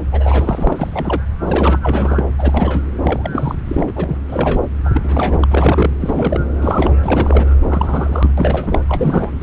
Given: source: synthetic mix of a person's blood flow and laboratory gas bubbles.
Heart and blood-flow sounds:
Doppler ultrasound of blood flow; subclavian vein
0.11-1.22 s: bubbles
1.44-2.24 s: bubbles
2.38-2.82 s: bubbles
3.04-3.55 s: bubbles
3.67-4.17 s: bubbles
4.29-4.60 s: bubbles
4.84-4.89 s: bubbles
4.93-5.47 s: bubbles
5.50-5.95 s: bubbles
6.00-6.40 s: bubbles
6.62-6.93 s: bubbles
7.02-7.46 s: bubbles
7.68-8.31 s: bubbles
8.37-8.81 s: bubbles
8.89-9.33 s: bubbles
9.40-9.43 s: bubbles
From the record:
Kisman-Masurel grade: 342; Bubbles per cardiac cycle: rolling drumbeat, 9 or more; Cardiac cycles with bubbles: 100%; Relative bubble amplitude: moderate (0.250 to 0.450); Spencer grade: 3 (all of the cardiac periods contain showers or single bubble signals, but not dominating or overriding the cardiac motion signals); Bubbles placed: anywhere in the cardiac cycle

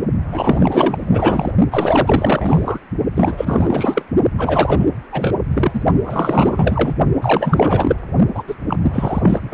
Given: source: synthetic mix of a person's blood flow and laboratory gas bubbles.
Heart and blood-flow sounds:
Doppler ultrasound of blood flow; precordium
0.30-1.51 s: bubbles
1.71-2.79 s: bubbles
3.15-4.04 s: bubbles
4.38-4.88 s: bubbles
5.12-5.34 s: bubbles
5.51-5.82 s: bubbles
6.04-6.93 s: bubbles
7.21-7.96 s: bubbles
8.34-8.43 s: bubbles
8.47-8.55 s: bubbles
8.68-8.77 s: bubbles
8.82-9.54 s: bubbles
From the record:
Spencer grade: 4 (maximum detectable bubble signal sounding continuously throughout systole and diastole of every cardiac period, and overriding the amplitude of the normal cardiac signals); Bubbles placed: only in the low amplitude regions of the cardiac cycle

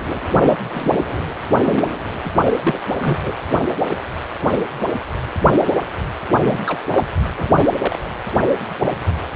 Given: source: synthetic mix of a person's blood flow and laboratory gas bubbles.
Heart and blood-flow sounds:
Doppler ultrasound of blood flow; precordium
0.39-0.58 s: bubbles
0.73-0.92 s: bubbles
1.63-1.84 s: bubbles
2.23-2.31 s: bubbles
2.45-2.54 s: bubbles
2.58-2.80 s: bubbles
3.00-3.18 s: bubbles
3.23-3.34 s: bubbles
6.42-6.78 s: bubbles
6.92-7.06 s: bubbles
7.38-7.49 s: bubbles
7.58-7.66 s: bubbles
7.79-7.99 s: bubbles
From the record:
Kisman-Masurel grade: 232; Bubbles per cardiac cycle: several, 3 to 8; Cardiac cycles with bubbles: 50 to 99%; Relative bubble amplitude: moderate (0.250 to 0.450); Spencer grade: 3 (all of the cardiac periods contain showers or single bubble signals, but not dominating or overriding the cardiac motion signals); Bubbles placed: anywhere in the cardiac cycle

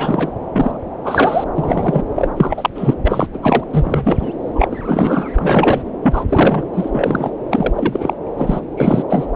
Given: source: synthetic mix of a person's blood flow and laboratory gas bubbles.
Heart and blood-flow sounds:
Doppler ultrasound of blood flow; subclavian vein
0.00-0.32 s: bubbles
0.52-0.77 s: bubbles
1.03-1.44 s: bubbles
1.55-2.04 s: bubbles
2.16-2.28 s: bubbles
2.37-2.70 s: bubbles
2.75-2.95 s: bubbles
3.04-3.27 s: bubbles
3.33-3.38 s: bubbles
3.42-3.64 s: bubbles
3.73-4.33 s: bubbles
4.55-5.29 s: bubbles
5.38-5.82 s: bubbles
6.02-6.24 s: bubbles
6.29-6.67 s: bubbles
6.74-7.31 s: bubbles
7.50-8.13 s: bubbles
8.37-8.61 s: bubbles
8.77-9.04 s: bubbles
9.09-9.26 s: bubbles
From the record:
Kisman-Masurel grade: 343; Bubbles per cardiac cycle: rolling drumbeat, 9 or more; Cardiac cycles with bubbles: 100%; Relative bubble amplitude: loud (0.450 to 0.775); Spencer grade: 3 (all of the cardiac periods contain showers or single bubble signals, but not dominating or overriding the cardiac motion signals); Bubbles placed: anywhere in the cardiac cycle

